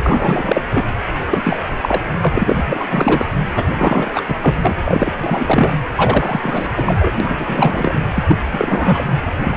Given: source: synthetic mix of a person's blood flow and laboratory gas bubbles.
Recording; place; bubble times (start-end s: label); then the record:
Doppler ultrasound of blood flow; precordium
0.06-0.62 s: bubbles
0.70-0.85 s: bubbles
1.30-1.62 s: bubbles
1.82-2.01 s: bubbles
2.20-2.86 s: bubbles
2.90-3.27 s: bubbles
3.55-3.63 s: bubbles
3.73-4.22 s: bubbles
4.27-4.35 s: bubbles
4.41-4.76 s: bubbles
4.85-5.13 s: bubbles
5.17-5.72 s: bubbles
5.95-6.69 s: bubbles
6.76-7.12 s: bubbles
7.20-8.04 s: bubbles
8.14-8.24 s: bubbles
8.27-8.37 s: bubbles
8.53-9.12 s: bubbles
9.35-9.57 s: bubbles
From the record:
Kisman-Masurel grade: 343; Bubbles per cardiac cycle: rolling drumbeat, 9 or more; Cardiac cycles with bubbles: 100%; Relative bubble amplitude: loud (0.450 to 0.775); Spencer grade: 3 (all of the cardiac periods contain showers or single bubble signals, but not dominating or overriding the cardiac motion signals); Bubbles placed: anywhere in the cardiac cycle